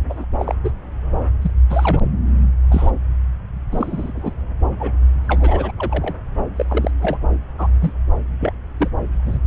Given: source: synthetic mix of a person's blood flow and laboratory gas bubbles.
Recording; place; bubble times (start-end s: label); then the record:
Doppler ultrasound of blood flow; subclavian vein
0.09-0.25 s: bubbles
0.39-0.55 s: bubbles
0.64-0.72 s: bubbles
1.42-1.51 s: bubbles
1.70-2.02 s: bubbles
2.70-2.92 s: bubbles
3.71-4.12 s: bubbles
4.15-4.33 s: bubbles
4.79-4.92 s: bubbles
5.23-5.71 s: bubbles
5.79-6.15 s: bubbles
6.56-6.91 s: bubbles
7.01-7.17 s: bubbles
7.58-7.68 s: bubbles
7.80-7.92 s: bubbles
8.40-8.53 s: bubbles
8.79-8.88 s: bubbles
9.26-9.38 s: bubbles
From the record:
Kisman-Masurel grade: 232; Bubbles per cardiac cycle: several, 3 to 8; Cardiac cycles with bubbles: 50 to 99%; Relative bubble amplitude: moderate (0.250 to 0.450); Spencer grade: 3 (all of the cardiac periods contain showers or single bubble signals, but not dominating or overriding the cardiac motion signals); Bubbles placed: anywhere in the cardiac cycle